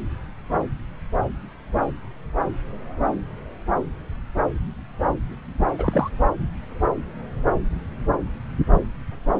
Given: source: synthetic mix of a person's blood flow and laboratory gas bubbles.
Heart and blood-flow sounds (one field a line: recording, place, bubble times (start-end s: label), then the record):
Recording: Doppler ultrasound of blood flow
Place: subclavian vein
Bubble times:
5.78-6.10 s: bubbles
From the record:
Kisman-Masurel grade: 212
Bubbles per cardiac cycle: several, 3 to 8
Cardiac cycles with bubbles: 1 to 10%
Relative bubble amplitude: moderate (0.250 to 0.450)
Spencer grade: 1 (occasional bubble signal discernible with the cardiac motion signal, with majority of cardiac periods free of bubbles)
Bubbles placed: anywhere in the cardiac cycle